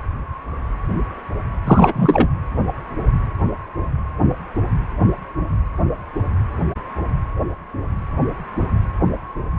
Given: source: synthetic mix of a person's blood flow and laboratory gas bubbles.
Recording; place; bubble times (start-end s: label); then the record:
Doppler ultrasound of blood flow; precordium
1.65-1.93 s: bubbles
1.95-2.27 s: bubbles
From the record:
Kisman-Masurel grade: 213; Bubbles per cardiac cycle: several, 3 to 8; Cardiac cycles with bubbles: 1 to 10%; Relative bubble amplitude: loud (0.450 to 0.775); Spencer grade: 1 (occasional bubble signal discernible with the cardiac motion signal, with majority of cardiac periods free of bubbles); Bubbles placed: anywhere in the cardiac cycle